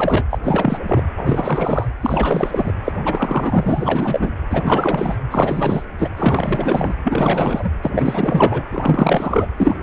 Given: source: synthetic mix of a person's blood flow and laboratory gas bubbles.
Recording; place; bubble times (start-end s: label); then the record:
Doppler ultrasound of blood flow; precordium
0.00-0.24 s: bubbles
0.30-0.39 s: bubbles
0.43-0.79 s: bubbles
0.86-1.03 s: bubbles
1.16-1.89 s: bubbles
2.01-2.73 s: bubbles
2.84-2.92 s: bubbles
3.04-4.32 s: bubbles
4.50-5.16 s: bubbles
5.31-5.87 s: bubbles
5.99-6.09 s: bubbles
6.17-6.95 s: bubbles
7.04-7.72 s: bubbles
7.82-8.64 s: bubbles
8.69-9.47 s: bubbles
9.58-9.76 s: bubbles
From the record:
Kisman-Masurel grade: 444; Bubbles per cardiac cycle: continuous sound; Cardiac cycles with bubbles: 100%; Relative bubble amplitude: maximal (0.775 to 0.999); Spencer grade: 4 (maximum detectable bubble signal sounding continuously throughout systole and diastole of every cardiac period, and overriding the amplitude of the normal cardiac signals); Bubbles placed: anywhere in the cardiac cycle